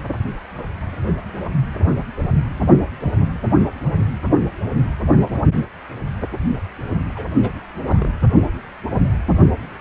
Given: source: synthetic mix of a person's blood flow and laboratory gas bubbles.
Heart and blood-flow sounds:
Doppler ultrasound of blood flow; precordium
7.09-7.26 s: bubbles
7.42-7.52 s: bubbles
7.71-8.13 s: bubbles
From the record:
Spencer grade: 2 (many but less than half of the cardiac periods contain bubble signals, singularly or in groups); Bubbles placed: only in the low amplitude regions of the cardiac cycle

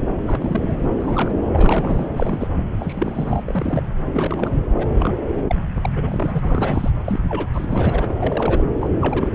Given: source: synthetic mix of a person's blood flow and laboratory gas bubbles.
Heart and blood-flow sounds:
Doppler ultrasound of blood flow; subclavian vein
0.18-0.90 s: bubbles
0.99-1.33 s: bubbles
1.52-2.09 s: bubbles
2.16-2.47 s: bubbles
2.79-3.83 s: bubbles
4.13-4.54 s: bubbles
4.77-4.88 s: bubbles
4.97-5.14 s: bubbles
5.49-5.55 s: bubbles
5.74-5.89 s: bubbles
5.96-6.91 s: bubbles
7.04-7.20 s: bubbles
7.29-7.46 s: bubbles
7.54-8.15 s: bubbles
8.19-8.64 s: bubbles
8.81-8.89 s: bubbles
9.00-9.29 s: bubbles
From the record:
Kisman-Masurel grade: 242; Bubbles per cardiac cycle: several, 3 to 8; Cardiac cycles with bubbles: 100%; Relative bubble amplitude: moderate (0.250 to 0.450); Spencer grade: 3 (all of the cardiac periods contain showers or single bubble signals, but not dominating or overriding the cardiac motion signals); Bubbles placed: anywhere in the cardiac cycle

